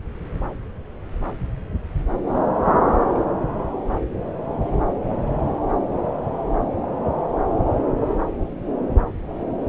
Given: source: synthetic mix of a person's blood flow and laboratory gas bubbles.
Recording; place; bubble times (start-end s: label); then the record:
Doppler ultrasound of blood flow; subclavian vein
2.27-2.50 s: bubbles
2.54-2.96 s: bubbles
From the record:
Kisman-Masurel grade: 111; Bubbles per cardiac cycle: 1 to 2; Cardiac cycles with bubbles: 1 to 10%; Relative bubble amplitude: barely perceptible (0.100 to 0.250); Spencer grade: 1 (occasional bubble signal discernible with the cardiac motion signal, with majority of cardiac periods free of bubbles); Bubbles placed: anywhere in the cardiac cycle